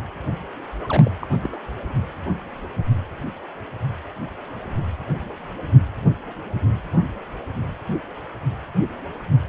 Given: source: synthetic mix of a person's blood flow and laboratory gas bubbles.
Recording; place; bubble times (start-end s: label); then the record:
Doppler ultrasound of blood flow; precordium
0.80-1.11 s: bubbles
1.20-1.27 s: bubbles
1.30-1.39 s: bubbles
1.41-1.71 s: bubbles
From the record:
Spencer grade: 1 (occasional bubble signal discernible with the cardiac motion signal, with majority of cardiac periods free of bubbles); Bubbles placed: anywhere in the cardiac cycle